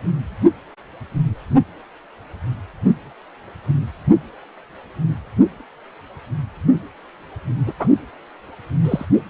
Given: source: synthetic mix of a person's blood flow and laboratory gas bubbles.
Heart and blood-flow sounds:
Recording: Doppler ultrasound of blood flow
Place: precordium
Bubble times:
7.66-7.73 s: bubbles
7.79-7.87 s: bubbles
8.85-9.05 s: bubbles
From the record:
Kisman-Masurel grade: 122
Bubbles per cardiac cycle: 1 to 2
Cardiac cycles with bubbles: 10 to 50%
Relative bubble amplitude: moderate (0.250 to 0.450)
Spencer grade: 2 (many but less than half of the cardiac periods contain bubble signals, singularly or in groups)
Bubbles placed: only in the low amplitude regions of the cardiac cycle

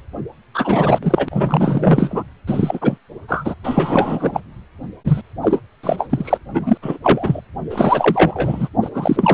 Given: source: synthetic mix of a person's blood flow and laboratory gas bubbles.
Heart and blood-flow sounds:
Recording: Doppler ultrasound of blood flow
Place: precordium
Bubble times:
0.54-0.98 s: bubbles
1.02-2.24 s: bubbles
2.47-2.98 s: bubbles
3.28-3.54 s: bubbles
3.64-4.41 s: bubbles
5.04-5.21 s: bubbles
5.42-5.61 s: bubbles
5.83-6.38 s: bubbles
6.53-6.78 s: bubbles
6.82-6.98 s: bubbles
7.03-7.41 s: bubbles
7.70-8.69 s: bubbles
8.81-8.89 s: bubbles
8.94-9.34 s: bubbles
From the record:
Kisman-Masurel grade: 343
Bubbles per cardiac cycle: rolling drumbeat, 9 or more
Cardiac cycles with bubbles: 100%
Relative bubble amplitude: loud (0.450 to 0.775)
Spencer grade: 3 (all of the cardiac periods contain showers or single bubble signals, but not dominating or overriding the cardiac motion signals)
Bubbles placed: anywhere in the cardiac cycle

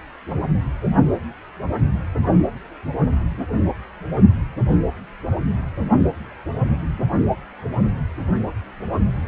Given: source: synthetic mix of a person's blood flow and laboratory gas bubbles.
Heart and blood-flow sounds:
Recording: Doppler ultrasound of blood flow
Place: precordium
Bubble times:
no bubbles
From the record:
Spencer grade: 0 (complete lack of bubble signals)

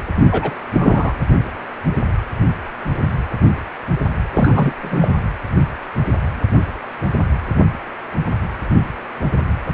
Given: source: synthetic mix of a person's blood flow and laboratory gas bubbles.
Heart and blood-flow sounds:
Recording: Doppler ultrasound of blood flow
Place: precordium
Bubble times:
0.29-0.55 s: bubbles
0.73-1.14 s: bubbles
4.34-4.72 s: bubbles
4.82-5.09 s: bubbles
From the record:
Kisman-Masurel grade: 223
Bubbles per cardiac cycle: several, 3 to 8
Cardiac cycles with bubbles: 10 to 50%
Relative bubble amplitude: loud (0.450 to 0.775)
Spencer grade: 2 (many but less than half of the cardiac periods contain bubble signals, singularly or in groups)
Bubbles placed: anywhere in the cardiac cycle

